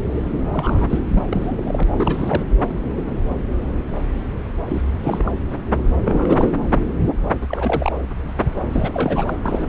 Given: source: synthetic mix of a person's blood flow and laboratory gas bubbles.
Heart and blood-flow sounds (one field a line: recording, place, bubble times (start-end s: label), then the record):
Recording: Doppler ultrasound of blood flow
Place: subclavian vein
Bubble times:
0.13-0.24 s: bubbles
0.53-0.99 s: bubbles
1.12-1.23 s: bubbles
1.29-1.61 s: bubbles
1.66-1.83 s: bubbles
1.98-2.44 s: bubbles
4.68-4.82 s: bubbles
5.03-5.32 s: bubbles
6.04-6.49 s: bubbles
7.41-7.92 s: bubbles
8.71-9.38 s: bubbles
9.43-9.69 s: bubbles
From the record:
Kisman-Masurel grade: 332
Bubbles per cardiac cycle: rolling drumbeat, 9 or more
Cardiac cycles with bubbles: 50 to 99%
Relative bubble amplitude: moderate (0.250 to 0.450)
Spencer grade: 3 (all of the cardiac periods contain showers or single bubble signals, but not dominating or overriding the cardiac motion signals)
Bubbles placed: anywhere in the cardiac cycle